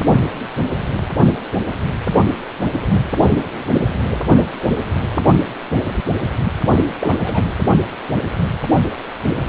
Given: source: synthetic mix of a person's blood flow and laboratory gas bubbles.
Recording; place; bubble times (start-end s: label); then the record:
Doppler ultrasound of blood flow; precordium
7.01-7.17 s: bubbles
7.21-7.50 s: bubbles
From the record:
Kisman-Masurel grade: 211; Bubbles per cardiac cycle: several, 3 to 8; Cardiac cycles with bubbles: 1 to 10%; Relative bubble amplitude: barely perceptible (0.100 to 0.250); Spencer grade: 1 (occasional bubble signal discernible with the cardiac motion signal, with majority of cardiac periods free of bubbles); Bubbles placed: only in the low amplitude regions of the cardiac cycle